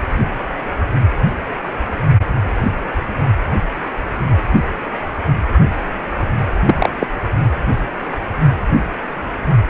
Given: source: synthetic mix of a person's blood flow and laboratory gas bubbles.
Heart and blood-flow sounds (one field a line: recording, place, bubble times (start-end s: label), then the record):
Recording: Doppler ultrasound of blood flow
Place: precordium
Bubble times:
6.66-6.90 s: bubbles
7.00-7.07 s: bubbles
From the record:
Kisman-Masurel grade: 123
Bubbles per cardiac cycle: 1 to 2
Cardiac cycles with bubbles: 10 to 50%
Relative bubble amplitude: loud (0.450 to 0.775)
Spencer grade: 2 (many but less than half of the cardiac periods contain bubble signals, singularly or in groups)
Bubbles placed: only in the low amplitude regions of the cardiac cycle